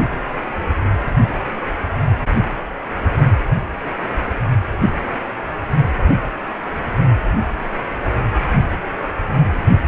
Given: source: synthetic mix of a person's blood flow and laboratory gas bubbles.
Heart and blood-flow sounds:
Doppler ultrasound of blood flow; precordium
no bubbles
From the record:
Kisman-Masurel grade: 000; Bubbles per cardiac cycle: 0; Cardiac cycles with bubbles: 0%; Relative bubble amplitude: no bubbles discernible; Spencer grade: 0 (complete lack of bubble signals)

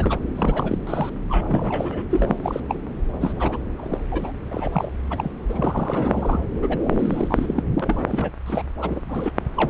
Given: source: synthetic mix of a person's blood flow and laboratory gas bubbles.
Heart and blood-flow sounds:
Doppler ultrasound of blood flow; subclavian vein
0.00-0.23 s: bubbles
0.36-0.78 s: bubbles
0.86-1.09 s: bubbles
1.29-2.04 s: bubbles
2.09-2.60 s: bubbles
2.68-2.76 s: bubbles
3.21-3.59 s: bubbles
3.76-3.99 s: bubbles
4.10-4.32 s: bubbles
4.50-4.91 s: bubbles
5.10-5.31 s: bubbles
5.49-6.44 s: bubbles
6.62-7.63 s: bubbles
7.80-8.32 s: bubbles
8.46-8.63 s: bubbles
8.81-9.01 s: bubbles
9.07-9.32 s: bubbles
9.55-9.70 s: bubbles
From the record:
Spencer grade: 3 (all of the cardiac periods contain showers or single bubble signals, but not dominating or overriding the cardiac motion signals); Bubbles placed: anywhere in the cardiac cycle

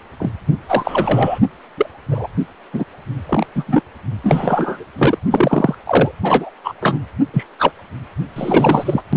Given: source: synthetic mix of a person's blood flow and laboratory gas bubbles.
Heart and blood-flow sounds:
Doppler ultrasound of blood flow; precordium
0.20-0.31 s: bubbles
0.68-1.39 s: bubbles
1.77-1.86 s: bubbles
2.10-2.27 s: bubbles
2.73-2.84 s: bubbles
3.28-3.46 s: bubbles
3.55-3.81 s: bubbles
4.24-4.85 s: bubbles
4.98-5.18 s: bubbles
5.30-5.75 s: bubbles
5.86-6.12 s: bubbles
6.23-6.50 s: bubbles
6.64-6.74 s: bubbles
6.81-7.00 s: bubbles
7.33-7.46 s: bubbles
7.59-7.71 s: bubbles
8.36-9.02 s: bubbles
9.12-9.17 s: bubbles
From the record:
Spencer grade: 3 (all of the cardiac periods contain showers or single bubble signals, but not dominating or overriding the cardiac motion signals); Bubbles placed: anywhere in the cardiac cycle

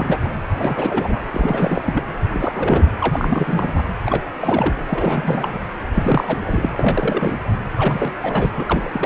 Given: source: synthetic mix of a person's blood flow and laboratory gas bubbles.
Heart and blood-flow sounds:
Doppler ultrasound of blood flow; precordium
0.00-0.18 s: bubbles
0.24-0.28 s: bubbles
0.55-1.24 s: bubbles
1.30-1.81 s: bubbles
1.84-2.03 s: bubbles
2.33-2.85 s: bubbles
3.00-3.82 s: bubbles
4.05-4.25 s: bubbles
4.41-4.75 s: bubbles
4.87-5.59 s: bubbles
5.90-6.69 s: bubbles
6.75-7.38 s: bubbles
7.77-8.12 s: bubbles
8.22-8.50 s: bubbles
8.57-8.64 s: bubbles
8.68-8.90 s: bubbles
8.93-9.06 s: bubbles
From the record:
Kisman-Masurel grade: 342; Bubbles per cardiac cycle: rolling drumbeat, 9 or more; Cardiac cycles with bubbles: 100%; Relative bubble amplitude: moderate (0.250 to 0.450); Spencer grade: 3 (all of the cardiac periods contain showers or single bubble signals, but not dominating or overriding the cardiac motion signals); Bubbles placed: anywhere in the cardiac cycle

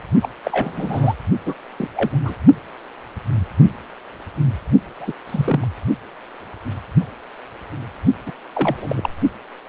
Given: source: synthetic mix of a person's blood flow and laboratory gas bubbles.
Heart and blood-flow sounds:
Doppler ultrasound of blood flow; precordium
0.22-0.29 s: bubbles
0.43-1.14 s: bubbles
1.46-1.54 s: bubbles
1.79-1.88 s: bubbles
1.95-2.18 s: bubbles
2.24-2.35 s: bubbles
5.00-5.12 s: bubbles
5.26-5.69 s: bubbles
8.27-8.31 s: bubbles
8.54-9.10 s: bubbles
From the record:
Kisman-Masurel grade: 222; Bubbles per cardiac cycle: several, 3 to 8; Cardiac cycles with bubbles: 10 to 50%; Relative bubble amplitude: moderate (0.250 to 0.450); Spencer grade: 2 (many but less than half of the cardiac periods contain bubble signals, singularly or in groups); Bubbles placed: only in the low amplitude regions of the cardiac cycle

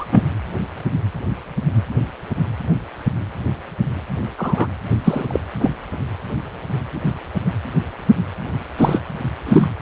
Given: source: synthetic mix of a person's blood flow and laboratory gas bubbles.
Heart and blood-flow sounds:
Doppler ultrasound of blood flow; precordium
0.00-0.05 s: bubbles
0.12-0.22 s: bubbles
4.38-4.67 s: bubbles
5.04-5.39 s: bubbles
5.59-5.72 s: bubbles
8.78-8.99 s: bubbles
9.46-9.70 s: bubbles
From the record:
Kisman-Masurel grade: 123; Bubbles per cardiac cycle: 1 to 2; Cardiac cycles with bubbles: 10 to 50%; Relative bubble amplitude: loud (0.450 to 0.775); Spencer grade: 2 (many but less than half of the cardiac periods contain bubble signals, singularly or in groups); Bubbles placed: anywhere in the cardiac cycle

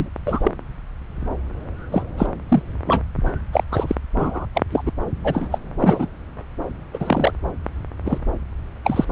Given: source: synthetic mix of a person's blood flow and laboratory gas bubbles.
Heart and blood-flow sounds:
Doppler ultrasound of blood flow; subclavian vein
0.00-0.09 s: bubbles
0.26-0.51 s: bubbles
1.92-2.05 s: bubbles
2.17-2.26 s: bubbles
2.48-2.62 s: bubbles
2.86-3.01 s: bubbles
3.52-3.63 s: bubbles
3.71-3.95 s: bubbles
4.16-4.46 s: bubbles
4.54-4.62 s: bubbles
4.71-4.82 s: bubbles
4.85-4.92 s: bubbles
5.23-5.48 s: bubbles
5.51-5.58 s: bubbles
5.79-6.06 s: bubbles
6.93-7.32 s: bubbles
8.04-8.19 s: bubbles
8.84-9.05 s: bubbles
9.09-9.11 s: bubbles
From the record:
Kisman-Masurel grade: 233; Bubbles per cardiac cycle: several, 3 to 8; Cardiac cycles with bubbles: 50 to 99%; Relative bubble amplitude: loud (0.450 to 0.775); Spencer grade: 3 (all of the cardiac periods contain showers or single bubble signals, but not dominating or overriding the cardiac motion signals); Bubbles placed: anywhere in the cardiac cycle

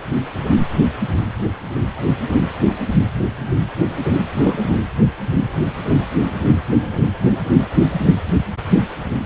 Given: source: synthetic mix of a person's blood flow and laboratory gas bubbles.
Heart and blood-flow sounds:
Doppler ultrasound of blood flow; precordium
4.33-4.76 s: bubbles
From the record:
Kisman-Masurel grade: 212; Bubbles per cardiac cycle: several, 3 to 8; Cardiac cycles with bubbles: 1 to 10%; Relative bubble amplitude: moderate (0.250 to 0.450); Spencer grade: 1 (occasional bubble signal discernible with the cardiac motion signal, with majority of cardiac periods free of bubbles); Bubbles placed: anywhere in the cardiac cycle

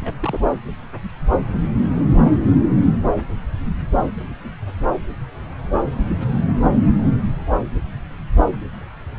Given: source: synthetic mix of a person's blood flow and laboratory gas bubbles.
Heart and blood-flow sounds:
Doppler ultrasound of blood flow; subclavian vein
0.00-0.15 s: bubbles
0.20-0.40 s: bubbles
From the record:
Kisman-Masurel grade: 111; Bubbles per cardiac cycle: 1 to 2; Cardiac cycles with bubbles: 1 to 10%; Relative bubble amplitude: barely perceptible (0.100 to 0.250); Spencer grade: 1 (occasional bubble signal discernible with the cardiac motion signal, with majority of cardiac periods free of bubbles); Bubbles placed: anywhere in the cardiac cycle

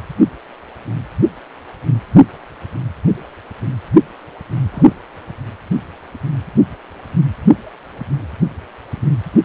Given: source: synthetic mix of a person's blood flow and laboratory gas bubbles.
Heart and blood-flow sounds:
Doppler ultrasound of blood flow; precordium
4.71-4.94 s: bubbles
From the record:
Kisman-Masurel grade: 111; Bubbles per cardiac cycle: 1 to 2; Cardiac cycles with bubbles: 1 to 10%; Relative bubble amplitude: barely perceptible (0.100 to 0.250); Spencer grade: 1 (occasional bubble signal discernible with the cardiac motion signal, with majority of cardiac periods free of bubbles); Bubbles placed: anywhere in the cardiac cycle

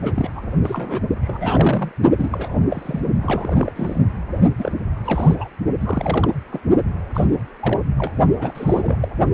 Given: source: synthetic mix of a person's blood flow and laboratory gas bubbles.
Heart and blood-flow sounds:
Doppler ultrasound of blood flow; precordium
0.02-0.28 s: bubbles
0.36-0.41 s: bubbles
0.62-1.01 s: bubbles
1.22-1.92 s: bubbles
2.17-2.56 s: bubbles
2.70-3.01 s: bubbles
3.21-3.72 s: bubbles
3.75-4.02 s: bubbles
4.58-4.72 s: bubbles
5.06-5.35 s: bubbles
5.38-5.48 s: bubbles
5.80-6.30 s: bubbles
6.52-6.60 s: bubbles
7.14-7.27 s: bubbles
7.61-7.80 s: bubbles
7.98-8.13 s: bubbles
8.37-8.96 s: bubbles
9.00-9.08 s: bubbles
From the record:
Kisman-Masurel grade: 242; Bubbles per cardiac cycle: several, 3 to 8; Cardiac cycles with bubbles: 100%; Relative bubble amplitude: moderate (0.250 to 0.450); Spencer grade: 3 (all of the cardiac periods contain showers or single bubble signals, but not dominating or overriding the cardiac motion signals); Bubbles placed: only in the low amplitude regions of the cardiac cycle

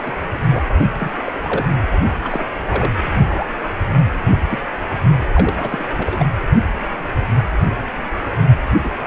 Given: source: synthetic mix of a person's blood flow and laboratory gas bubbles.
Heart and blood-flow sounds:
Doppler ultrasound of blood flow; precordium
0.02-0.12 s: bubbles
0.34-0.40 s: bubbles
0.50-0.68 s: bubbles
0.98-1.10 s: bubbles
1.26-1.35 s: bubbles
1.43-1.68 s: bubbles
2.21-2.46 s: bubbles
2.71-2.91 s: bubbles
3.27-3.46 s: bubbles
4.31-4.38 s: bubbles
4.50-4.59 s: bubbles
5.34-5.54 s: bubbles
5.57-5.86 s: bubbles
5.94-6.26 s: bubbles
8.85-8.90 s: bubbles
From the record:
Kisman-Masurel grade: 232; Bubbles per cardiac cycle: several, 3 to 8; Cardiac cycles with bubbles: 50 to 99%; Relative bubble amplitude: moderate (0.250 to 0.450); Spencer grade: 3 (all of the cardiac periods contain showers or single bubble signals, but not dominating or overriding the cardiac motion signals); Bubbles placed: only in the low amplitude regions of the cardiac cycle

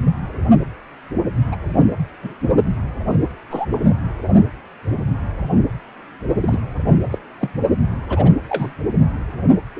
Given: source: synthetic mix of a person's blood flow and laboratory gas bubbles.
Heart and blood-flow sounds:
Doppler ultrasound of blood flow; precordium
1.52-1.56 s: bubbles
2.22-2.34 s: bubbles
3.50-3.65 s: bubbles
3.71-3.94 s: bubbles
6.40-6.60 s: bubbles
7.11-7.19 s: bubbles
7.41-7.50 s: bubbles
8.09-8.31 s: bubbles
8.48-8.73 s: bubbles
9.76-9.80 s: bubbles
From the record:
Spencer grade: 2 (many but less than half of the cardiac periods contain bubble signals, singularly or in groups); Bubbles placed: anywhere in the cardiac cycle

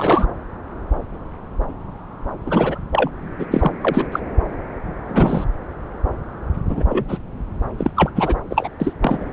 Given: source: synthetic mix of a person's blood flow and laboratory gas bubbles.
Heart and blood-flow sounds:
Doppler ultrasound of blood flow; subclavian vein
0.00-0.27 s: bubbles
2.46-2.79 s: bubbles
2.92-3.10 s: bubbles
3.38-3.46 s: bubbles
3.51-3.71 s: bubbles
3.81-4.07 s: bubbles
4.12-4.20 s: bubbles
5.08-5.45 s: bubbles
6.69-6.84 s: bubbles
6.88-7.04 s: bubbles
7.08-7.18 s: bubbles
7.79-7.91 s: bubbles
7.96-8.10 s: bubbles
8.16-8.35 s: bubbles
8.50-8.69 s: bubbles
8.80-8.93 s: bubbles
9.02-9.25 s: bubbles
From the record:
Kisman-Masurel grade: 232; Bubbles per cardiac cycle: several, 3 to 8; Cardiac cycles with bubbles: 50 to 99%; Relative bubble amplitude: moderate (0.250 to 0.450); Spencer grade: 3 (all of the cardiac periods contain showers or single bubble signals, but not dominating or overriding the cardiac motion signals); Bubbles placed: anywhere in the cardiac cycle

